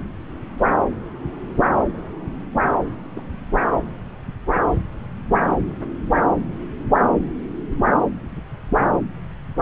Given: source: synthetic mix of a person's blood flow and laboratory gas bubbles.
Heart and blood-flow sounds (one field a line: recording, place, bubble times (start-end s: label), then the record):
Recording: Doppler ultrasound of blood flow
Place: subclavian vein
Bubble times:
2.74-2.87 s: bubbles
3.13-3.22 s: bubbles
From the record:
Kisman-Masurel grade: 111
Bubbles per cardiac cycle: 1 to 2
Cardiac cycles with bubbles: 1 to 10%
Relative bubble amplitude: barely perceptible (0.100 to 0.250)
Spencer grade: 1 (occasional bubble signal discernible with the cardiac motion signal, with majority of cardiac periods free of bubbles)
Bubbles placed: anywhere in the cardiac cycle